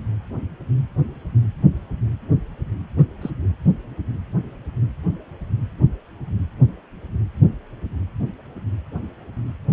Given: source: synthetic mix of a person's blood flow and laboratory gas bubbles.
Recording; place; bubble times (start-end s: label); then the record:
Doppler ultrasound of blood flow; precordium
2.98-3.06 s: bubbles
3.22-3.31 s: bubbles
From the record:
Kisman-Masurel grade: 111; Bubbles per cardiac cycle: 1 to 2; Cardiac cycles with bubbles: 1 to 10%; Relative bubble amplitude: barely perceptible (0.100 to 0.250); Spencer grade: 1 (occasional bubble signal discernible with the cardiac motion signal, with majority of cardiac periods free of bubbles); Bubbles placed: anywhere in the cardiac cycle